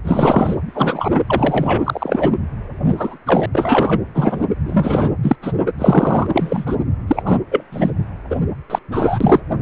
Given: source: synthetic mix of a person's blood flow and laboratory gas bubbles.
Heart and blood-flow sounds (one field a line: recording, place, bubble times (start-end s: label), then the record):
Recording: Doppler ultrasound of blood flow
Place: precordium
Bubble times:
0.03-0.57 s: bubbles
0.66-1.21 s: bubbles
1.26-2.31 s: bubbles
2.90-3.17 s: bubbles
3.26-3.46 s: bubbles
3.52-4.01 s: bubbles
4.14-4.47 s: bubbles
4.65-5.12 s: bubbles
5.22-5.36 s: bubbles
5.42-5.53 s: bubbles
5.78-6.27 s: bubbles
6.32-6.76 s: bubbles
7.07-7.22 s: bubbles
7.25-7.38 s: bubbles
7.51-7.64 s: bubbles
7.72-7.90 s: bubbles
8.30-8.36 s: bubbles
8.70-8.79 s: bubbles
8.92-9.40 s: bubbles
From the record:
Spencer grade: 3 (all of the cardiac periods contain showers or single bubble signals, but not dominating or overriding the cardiac motion signals)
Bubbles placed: anywhere in the cardiac cycle